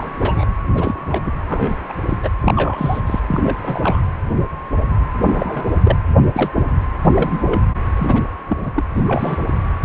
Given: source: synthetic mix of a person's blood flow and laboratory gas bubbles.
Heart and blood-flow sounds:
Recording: Doppler ultrasound of blood flow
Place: precordium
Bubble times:
0.00-0.46 s: bubbles
0.74-1.31 s: bubbles
1.47-1.75 s: bubbles
1.89-1.94 s: bubbles
2.06-2.17 s: bubbles
2.23-2.30 s: bubbles
2.41-3.01 s: bubbles
3.06-3.20 s: bubbles
3.28-3.40 s: bubbles
3.43-3.57 s: bubbles
3.62-4.01 s: bubbles
5.18-5.65 s: bubbles
5.84-5.96 s: bubbles
6.33-6.50 s: bubbles
6.55-6.63 s: bubbles
7.01-7.67 s: bubbles
7.96-8.23 s: bubbles
8.48-8.71 s: bubbles
8.75-8.84 s: bubbles
8.95-9.45 s: bubbles
9.82-9.85 s: bubbles
From the record:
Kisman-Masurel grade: 232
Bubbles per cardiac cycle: several, 3 to 8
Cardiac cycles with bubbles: 50 to 99%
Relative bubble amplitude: moderate (0.250 to 0.450)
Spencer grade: 3 (all of the cardiac periods contain showers or single bubble signals, but not dominating or overriding the cardiac motion signals)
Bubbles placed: anywhere in the cardiac cycle

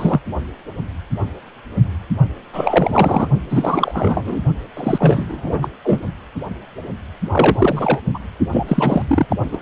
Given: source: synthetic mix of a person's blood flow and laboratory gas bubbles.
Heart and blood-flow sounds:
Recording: Doppler ultrasound of blood flow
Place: precordium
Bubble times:
0.00-0.20 s: bubbles
2.53-3.27 s: bubbles
3.50-4.42 s: bubbles
4.77-5.70 s: bubbles
5.84-5.99 s: bubbles
7.30-8.00 s: bubbles
8.14-8.19 s: bubbles
8.52-9.02 s: bubbles
9.08-9.27 s: bubbles
9.29-9.36 s: bubbles
9.51-9.59 s: bubbles
From the record:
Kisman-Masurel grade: 333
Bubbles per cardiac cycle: rolling drumbeat, 9 or more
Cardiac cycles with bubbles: 50 to 99%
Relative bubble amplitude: loud (0.450 to 0.775)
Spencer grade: 3 (all of the cardiac periods contain showers or single bubble signals, but not dominating or overriding the cardiac motion signals)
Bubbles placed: only in the low amplitude regions of the cardiac cycle

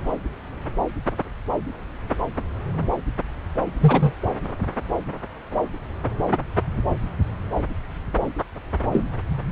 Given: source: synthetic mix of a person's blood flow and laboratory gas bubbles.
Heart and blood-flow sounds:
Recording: Doppler ultrasound of blood flow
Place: subclavian vein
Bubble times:
3.80-4.12 s: bubbles
8.92-9.04 s: bubbles
From the record:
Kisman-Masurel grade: 112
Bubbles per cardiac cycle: 1 to 2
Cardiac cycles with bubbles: 1 to 10%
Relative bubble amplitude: moderate (0.250 to 0.450)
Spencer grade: 1 (occasional bubble signal discernible with the cardiac motion signal, with majority of cardiac periods free of bubbles)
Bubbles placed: anywhere in the cardiac cycle

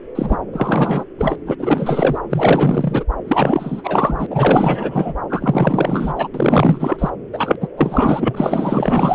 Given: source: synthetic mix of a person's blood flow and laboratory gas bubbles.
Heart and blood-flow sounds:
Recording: Doppler ultrasound of blood flow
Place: subclavian vein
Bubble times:
0.15-0.41 s: bubbles
0.53-1.04 s: bubbles
1.18-1.35 s: bubbles
1.47-1.56 s: bubbles
1.59-2.18 s: bubbles
2.29-3.04 s: bubbles
3.28-4.27 s: bubbles
4.30-5.15 s: bubbles
5.29-6.28 s: bubbles
6.34-7.10 s: bubbles
7.33-7.56 s: bubbles
7.60-7.68 s: bubbles
7.76-9.15 s: bubbles
From the record:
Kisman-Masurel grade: 444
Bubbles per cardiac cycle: continuous sound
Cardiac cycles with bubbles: 100%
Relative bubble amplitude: maximal (0.775 to 0.999)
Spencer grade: 4 (maximum detectable bubble signal sounding continuously throughout systole and diastole of every cardiac period, and overriding the amplitude of the normal cardiac signals)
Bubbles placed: anywhere in the cardiac cycle

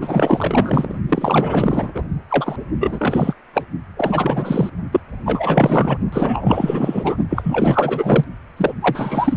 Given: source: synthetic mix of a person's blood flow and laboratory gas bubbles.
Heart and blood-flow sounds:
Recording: Doppler ultrasound of blood flow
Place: precordium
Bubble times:
0.01-0.95 s: bubbles
1.08-2.03 s: bubbles
2.29-2.56 s: bubbles
2.77-3.36 s: bubbles
3.54-3.64 s: bubbles
3.97-4.70 s: bubbles
4.92-5.00 s: bubbles
5.25-5.97 s: bubbles
6.12-7.17 s: bubbles
7.29-8.24 s: bubbles
8.57-8.74 s: bubbles
8.82-9.37 s: bubbles
From the record:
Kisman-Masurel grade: 444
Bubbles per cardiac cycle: continuous sound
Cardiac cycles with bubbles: 100%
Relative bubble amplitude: maximal (0.775 to 0.999)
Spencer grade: 4 (maximum detectable bubble signal sounding continuously throughout systole and diastole of every cardiac period, and overriding the amplitude of the normal cardiac signals)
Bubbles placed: only in the low amplitude regions of the cardiac cycle

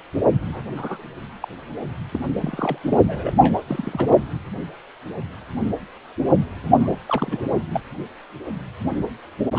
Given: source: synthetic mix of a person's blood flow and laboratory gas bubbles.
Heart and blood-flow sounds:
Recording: Doppler ultrasound of blood flow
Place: precordium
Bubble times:
0.46-0.65 s: bubbles
0.77-1.02 s: bubbles
1.41-1.46 s: bubbles
2.11-2.19 s: bubbles
2.40-2.78 s: bubbles
2.83-2.98 s: bubbles
3.08-3.34 s: bubbles
3.40-3.65 s: bubbles
3.68-4.23 s: bubbles
6.78-6.96 s: bubbles
7.08-7.41 s: bubbles
7.72-7.80 s: bubbles
9.55-9.58 s: bubbles
From the record:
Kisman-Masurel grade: 221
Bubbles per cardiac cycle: several, 3 to 8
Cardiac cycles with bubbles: 10 to 50%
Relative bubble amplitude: barely perceptible (0.100 to 0.250)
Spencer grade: 2 (many but less than half of the cardiac periods contain bubble signals, singularly or in groups)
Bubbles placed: only in the low amplitude regions of the cardiac cycle

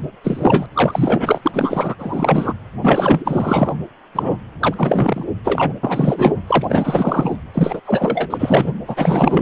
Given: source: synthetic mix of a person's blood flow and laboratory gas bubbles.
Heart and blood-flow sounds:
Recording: Doppler ultrasound of blood flow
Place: precordium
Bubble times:
0.23-0.66 s: bubbles
0.74-1.95 s: bubbles
1.99-2.54 s: bubbles
2.82-3.75 s: bubbles
4.15-4.37 s: bubbles
4.60-5.24 s: bubbles
5.44-5.73 s: bubbles
5.83-6.40 s: bubbles
6.47-7.37 s: bubbles
7.54-7.80 s: bubbles
7.85-8.72 s: bubbles
8.87-9.42 s: bubbles
From the record:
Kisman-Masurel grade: 444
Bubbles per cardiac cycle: continuous sound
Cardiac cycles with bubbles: 100%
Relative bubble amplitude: maximal (0.775 to 0.999)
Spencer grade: 4 (maximum detectable bubble signal sounding continuously throughout systole and diastole of every cardiac period, and overriding the amplitude of the normal cardiac signals)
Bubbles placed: anywhere in the cardiac cycle

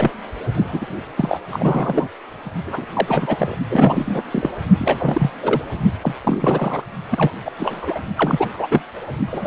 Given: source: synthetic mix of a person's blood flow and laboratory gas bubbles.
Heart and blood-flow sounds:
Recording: Doppler ultrasound of blood flow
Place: precordium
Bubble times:
0.00-0.12 s: bubbles
0.53-0.89 s: bubbles
1.15-1.39 s: bubbles
1.50-2.08 s: bubbles
2.66-2.85 s: bubbles
2.93-3.56 s: bubbles
3.70-4.22 s: bubbles
4.31-4.50 s: bubbles
4.79-5.30 s: bubbles
5.42-5.62 s: bubbles
6.03-6.16 s: bubbles
6.23-6.84 s: bubbles
7.10-7.33 s: bubbles
7.44-7.51 s: bubbles
7.57-8.00 s: bubbles
8.17-8.49 s: bubbles
8.53-8.67 s: bubbles
8.71-8.83 s: bubbles
9.32-9.47 s: bubbles
From the record:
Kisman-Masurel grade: 343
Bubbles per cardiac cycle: rolling drumbeat, 9 or more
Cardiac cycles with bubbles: 100%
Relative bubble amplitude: loud (0.450 to 0.775)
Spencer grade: 3 (all of the cardiac periods contain showers or single bubble signals, but not dominating or overriding the cardiac motion signals)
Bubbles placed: only in the low amplitude regions of the cardiac cycle

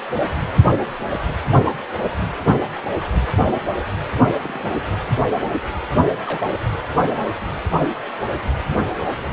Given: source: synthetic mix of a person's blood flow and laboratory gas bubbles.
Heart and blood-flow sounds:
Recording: Doppler ultrasound of blood flow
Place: precordium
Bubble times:
1.10-1.20 s: bubbles
4.32-4.73 s: bubbles
6.26-6.59 s: bubbles
6.96-7.00 s: bubbles
7.13-7.19 s: bubbles
From the record:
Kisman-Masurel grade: 121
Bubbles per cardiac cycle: 1 to 2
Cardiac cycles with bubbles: 10 to 50%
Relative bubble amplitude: barely perceptible (0.100 to 0.250)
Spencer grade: 2 (many but less than half of the cardiac periods contain bubble signals, singularly or in groups)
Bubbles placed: anywhere in the cardiac cycle

